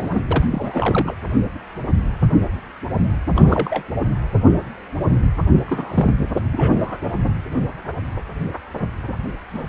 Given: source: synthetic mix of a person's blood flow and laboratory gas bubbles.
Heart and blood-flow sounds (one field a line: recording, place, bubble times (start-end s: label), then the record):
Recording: Doppler ultrasound of blood flow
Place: precordium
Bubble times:
0.00-0.21 s: bubbles
0.30-0.44 s: bubbles
0.50-1.14 s: bubbles
3.34-3.82 s: bubbles
5.65-6.10 s: bubbles
6.51-6.96 s: bubbles
9.53-9.67 s: bubbles
From the record:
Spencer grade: 3 (all of the cardiac periods contain showers or single bubble signals, but not dominating or overriding the cardiac motion signals)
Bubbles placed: anywhere in the cardiac cycle